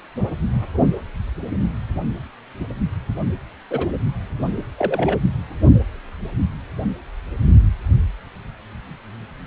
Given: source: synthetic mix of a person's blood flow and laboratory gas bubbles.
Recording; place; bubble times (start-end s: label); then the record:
Doppler ultrasound of blood flow; precordium
3.71-3.87 s: bubbles
4.78-5.19 s: bubbles
From the record:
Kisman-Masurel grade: 122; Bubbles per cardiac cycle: 1 to 2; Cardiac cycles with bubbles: 10 to 50%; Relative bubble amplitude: moderate (0.250 to 0.450); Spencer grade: 2 (many but less than half of the cardiac periods contain bubble signals, singularly or in groups); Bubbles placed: only in the low amplitude regions of the cardiac cycle